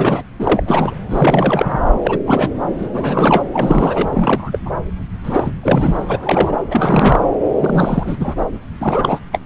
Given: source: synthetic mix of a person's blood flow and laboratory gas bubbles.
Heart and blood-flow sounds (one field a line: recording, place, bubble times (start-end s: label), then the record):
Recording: Doppler ultrasound of blood flow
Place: subclavian vein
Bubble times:
0.00-0.22 s: bubbles
0.39-0.94 s: bubbles
1.10-1.81 s: bubbles
2.04-2.19 s: bubbles
2.27-2.50 s: bubbles
2.78-2.88 s: bubbles
2.93-3.43 s: bubbles
3.53-4.10 s: bubbles
4.13-4.58 s: bubbles
4.66-4.71 s: bubbles
5.24-5.50 s: bubbles
5.62-6.04 s: bubbles
6.08-6.18 s: bubbles
6.22-6.59 s: bubbles
6.71-7.21 s: bubbles
7.58-8.36 s: bubbles
8.80-9.19 s: bubbles
9.32-9.39 s: bubbles
From the record:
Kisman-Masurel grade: 343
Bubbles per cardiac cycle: rolling drumbeat, 9 or more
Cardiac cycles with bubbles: 100%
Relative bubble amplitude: loud (0.450 to 0.775)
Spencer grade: 3 (all of the cardiac periods contain showers or single bubble signals, but not dominating or overriding the cardiac motion signals)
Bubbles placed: anywhere in the cardiac cycle